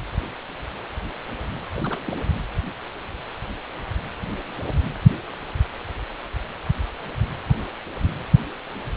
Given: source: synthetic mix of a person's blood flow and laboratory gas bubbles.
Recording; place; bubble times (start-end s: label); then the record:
Doppler ultrasound of blood flow; precordium
1.77-2.00 s: bubbles
2.05-2.20 s: bubbles
From the record:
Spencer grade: 1 (occasional bubble signal discernible with the cardiac motion signal, with majority of cardiac periods free of bubbles); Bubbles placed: anywhere in the cardiac cycle